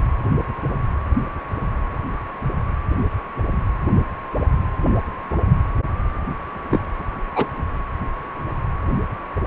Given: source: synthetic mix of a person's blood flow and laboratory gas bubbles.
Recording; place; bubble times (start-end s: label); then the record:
Doppler ultrasound of blood flow; precordium
6.70-6.85 s: bubbles
7.35-7.47 s: bubbles
From the record:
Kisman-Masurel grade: 122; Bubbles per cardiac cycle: 1 to 2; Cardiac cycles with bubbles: 10 to 50%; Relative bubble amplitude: moderate (0.250 to 0.450); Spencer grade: 2 (many but less than half of the cardiac periods contain bubble signals, singularly or in groups); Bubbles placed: anywhere in the cardiac cycle